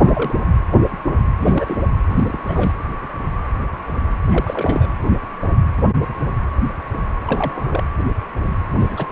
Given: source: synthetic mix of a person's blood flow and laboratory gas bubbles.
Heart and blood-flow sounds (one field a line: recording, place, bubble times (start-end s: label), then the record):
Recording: Doppler ultrasound of blood flow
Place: precordium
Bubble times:
0.00-0.33 s: bubbles
1.41-1.77 s: bubbles
2.08-2.39 s: bubbles
2.48-2.74 s: bubbles
4.29-4.89 s: bubbles
7.25-7.83 s: bubbles
8.79-9.07 s: bubbles
From the record:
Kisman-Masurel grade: 222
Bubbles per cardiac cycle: several, 3 to 8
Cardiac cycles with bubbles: 10 to 50%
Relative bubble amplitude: moderate (0.250 to 0.450)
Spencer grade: 2 (many but less than half of the cardiac periods contain bubble signals, singularly or in groups)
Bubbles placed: anywhere in the cardiac cycle